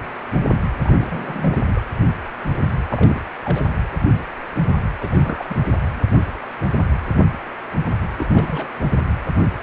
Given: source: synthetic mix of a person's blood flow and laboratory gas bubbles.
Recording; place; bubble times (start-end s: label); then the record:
Doppler ultrasound of blood flow; precordium
0.82-1.81 s: bubbles
2.89-3.21 s: bubbles
3.44-3.73 s: bubbles
5.00-5.56 s: bubbles
8.18-8.68 s: bubbles
8.90-9.00 s: bubbles
From the record:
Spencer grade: 2 (many but less than half of the cardiac periods contain bubble signals, singularly or in groups); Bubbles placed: anywhere in the cardiac cycle